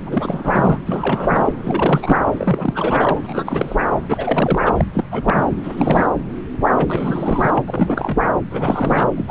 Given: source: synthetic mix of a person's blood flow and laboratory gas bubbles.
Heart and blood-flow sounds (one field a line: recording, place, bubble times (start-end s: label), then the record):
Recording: Doppler ultrasound of blood flow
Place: subclavian vein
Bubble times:
0.06-0.78 s: bubbles
0.86-1.53 s: bubbles
1.63-2.17 s: bubbles
2.37-3.21 s: bubbles
3.25-3.76 s: bubbles
4.08-4.61 s: bubbles
4.65-4.72 s: bubbles
4.77-4.84 s: bubbles
4.94-5.04 s: bubbles
5.11-5.47 s: bubbles
5.63-6.09 s: bubbles
6.60-8.21 s: bubbles
8.50-9.06 s: bubbles
9.17-9.31 s: bubbles
From the record:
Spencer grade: 3 (all of the cardiac periods contain showers or single bubble signals, but not dominating or overriding the cardiac motion signals)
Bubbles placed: anywhere in the cardiac cycle